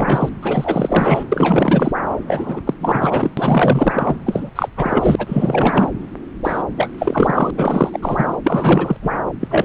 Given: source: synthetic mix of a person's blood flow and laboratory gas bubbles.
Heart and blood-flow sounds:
Doppler ultrasound of blood flow; subclavian vein
0.00-0.29 s: bubbles
0.42-1.24 s: bubbles
1.32-1.92 s: bubbles
2.27-2.60 s: bubbles
2.67-2.74 s: bubbles
2.80-3.31 s: bubbles
3.37-4.17 s: bubbles
4.25-4.50 s: bubbles
4.55-4.69 s: bubbles
4.77-5.15 s: bubbles
5.18-5.90 s: bubbles
6.43-6.62 s: bubbles
6.76-6.90 s: bubbles
6.98-7.50 s: bubbles
7.56-8.37 s: bubbles
8.44-8.96 s: bubbles
9.02-9.11 s: bubbles
9.40-9.64 s: bubbles
From the record:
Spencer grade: 4 (maximum detectable bubble signal sounding continuously throughout systole and diastole of every cardiac period, and overriding the amplitude of the normal cardiac signals); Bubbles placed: anywhere in the cardiac cycle

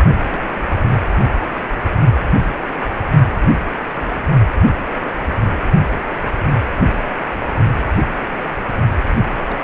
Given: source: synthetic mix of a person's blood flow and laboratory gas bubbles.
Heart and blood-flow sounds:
Doppler ultrasound of blood flow; precordium
0.31-0.45 s: bubbles
0.91-0.98 s: bubbles
3.93-4.20 s: bubbles
5.01-5.10 s: bubbles
9.46-9.58 s: bubbles
From the record:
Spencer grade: 2 (many but less than half of the cardiac periods contain bubble signals, singularly or in groups); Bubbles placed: only in the low amplitude regions of the cardiac cycle

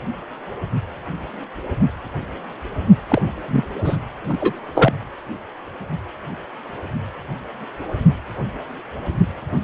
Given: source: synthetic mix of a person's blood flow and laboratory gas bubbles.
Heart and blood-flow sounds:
Doppler ultrasound of blood flow; precordium
3.08-3.21 s: bubbles
3.47-3.64 s: bubbles
3.84-3.97 s: bubbles
4.29-4.62 s: bubbles
4.75-4.93 s: bubbles
From the record:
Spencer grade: 2 (many but less than half of the cardiac periods contain bubble signals, singularly or in groups); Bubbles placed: anywhere in the cardiac cycle

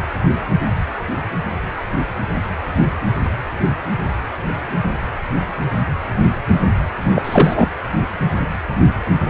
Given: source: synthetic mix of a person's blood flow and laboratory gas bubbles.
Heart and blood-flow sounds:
Doppler ultrasound of blood flow; precordium
7.15-7.67 s: bubbles
From the record:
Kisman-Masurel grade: 213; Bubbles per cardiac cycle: several, 3 to 8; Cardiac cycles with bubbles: 1 to 10%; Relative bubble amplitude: loud (0.450 to 0.775); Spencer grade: 1 (occasional bubble signal discernible with the cardiac motion signal, with majority of cardiac periods free of bubbles); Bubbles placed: anywhere in the cardiac cycle

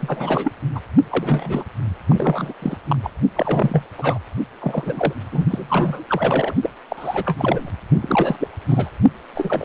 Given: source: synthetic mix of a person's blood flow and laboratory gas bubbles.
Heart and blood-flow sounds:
Doppler ultrasound of blood flow; precordium
0.00-0.52 s: bubbles
0.74-0.80 s: bubbles
1.09-1.64 s: bubbles
2.09-2.53 s: bubbles
2.62-2.77 s: bubbles
2.88-2.96 s: bubbles
3.02-3.10 s: bubbles
3.35-3.83 s: bubbles
3.97-4.18 s: bubbles
4.59-5.13 s: bubbles
5.31-5.47 s: bubbles
5.50-6.04 s: bubbles
6.07-6.54 s: bubbles
6.62-6.70 s: bubbles
6.89-7.70 s: bubbles
8.02-8.47 s: bubbles
8.69-8.89 s: bubbles
9.35-9.65 s: bubbles
From the record:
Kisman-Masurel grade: 343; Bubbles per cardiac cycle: rolling drumbeat, 9 or more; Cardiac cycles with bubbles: 100%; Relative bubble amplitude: loud (0.450 to 0.775); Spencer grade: 3 (all of the cardiac periods contain showers or single bubble signals, but not dominating or overriding the cardiac motion signals); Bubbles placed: only in the low amplitude regions of the cardiac cycle

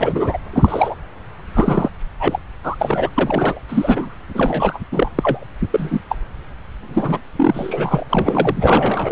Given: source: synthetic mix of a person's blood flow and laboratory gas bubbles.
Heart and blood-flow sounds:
Doppler ultrasound of blood flow; subclavian vein
0.00-0.38 s: bubbles
0.52-0.95 s: bubbles
1.54-1.90 s: bubbles
2.20-2.39 s: bubbles
2.63-2.75 s: bubbles
2.79-3.10 s: bubbles
3.15-3.61 s: bubbles
3.69-4.15 s: bubbles
4.34-4.79 s: bubbles
4.92-5.12 s: bubbles
5.15-5.44 s: bubbles
5.71-6.00 s: bubbles
6.09-6.16 s: bubbles
6.83-7.21 s: bubbles
7.36-8.03 s: bubbles
8.09-8.54 s: bubbles
8.61-9.12 s: bubbles
From the record:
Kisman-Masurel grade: 233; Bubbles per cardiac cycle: several, 3 to 8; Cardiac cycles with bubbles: 50 to 99%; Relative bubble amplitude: loud (0.450 to 0.775); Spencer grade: 3 (all of the cardiac periods contain showers or single bubble signals, but not dominating or overriding the cardiac motion signals); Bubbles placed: anywhere in the cardiac cycle

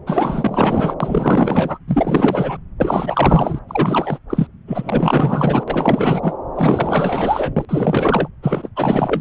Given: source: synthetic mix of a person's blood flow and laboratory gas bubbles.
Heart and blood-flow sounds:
Doppler ultrasound of blood flow; subclavian vein
0.07-0.94 s: bubbles
1.00-1.79 s: bubbles
1.88-2.57 s: bubbles
2.80-3.59 s: bubbles
3.69-4.18 s: bubbles
4.29-4.47 s: bubbles
4.67-5.64 s: bubbles
5.67-6.36 s: bubbles
6.55-7.65 s: bubbles
7.69-8.29 s: bubbles
8.43-8.69 s: bubbles
8.76-9.21 s: bubbles
From the record:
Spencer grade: 4 (maximum detectable bubble signal sounding continuously throughout systole and diastole of every cardiac period, and overriding the amplitude of the normal cardiac signals); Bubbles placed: anywhere in the cardiac cycle

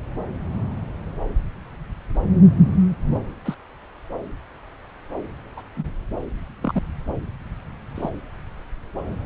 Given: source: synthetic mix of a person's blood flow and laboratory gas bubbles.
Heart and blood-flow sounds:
Doppler ultrasound of blood flow; subclavian vein
3.45-3.54 s: bubbles
5.57-5.62 s: bubbles
5.77-5.85 s: bubbles
6.61-6.83 s: bubbles
7.95-8.10 s: bubbles
From the record:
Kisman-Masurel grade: 121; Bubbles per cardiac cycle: 1 to 2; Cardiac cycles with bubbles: 10 to 50%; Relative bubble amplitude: barely perceptible (0.100 to 0.250); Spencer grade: 2 (many but less than half of the cardiac periods contain bubble signals, singularly or in groups); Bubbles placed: anywhere in the cardiac cycle

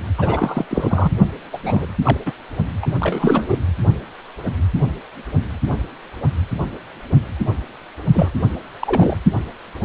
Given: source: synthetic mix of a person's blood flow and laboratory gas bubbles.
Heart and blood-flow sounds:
Doppler ultrasound of blood flow; precordium
0.18-0.65 s: bubbles
0.70-1.12 s: bubbles
1.53-1.58 s: bubbles
1.65-1.85 s: bubbles
2.03-2.17 s: bubbles
2.25-2.33 s: bubbles
2.81-2.86 s: bubbles
3.00-3.57 s: bubbles
8.14-8.31 s: bubbles
8.81-9.18 s: bubbles
From the record:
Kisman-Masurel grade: 222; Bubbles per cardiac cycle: several, 3 to 8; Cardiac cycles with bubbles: 10 to 50%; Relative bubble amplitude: moderate (0.250 to 0.450); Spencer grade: 2 (many but less than half of the cardiac periods contain bubble signals, singularly or in groups); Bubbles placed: only in the low amplitude regions of the cardiac cycle

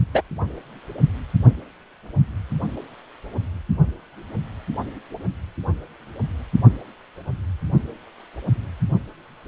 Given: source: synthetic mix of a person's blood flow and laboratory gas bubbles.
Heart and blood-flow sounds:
Doppler ultrasound of blood flow; precordium
0.14-0.22 s: bubbles
From the record:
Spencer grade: 1 (occasional bubble signal discernible with the cardiac motion signal, with majority of cardiac periods free of bubbles); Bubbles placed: only in the low amplitude regions of the cardiac cycle

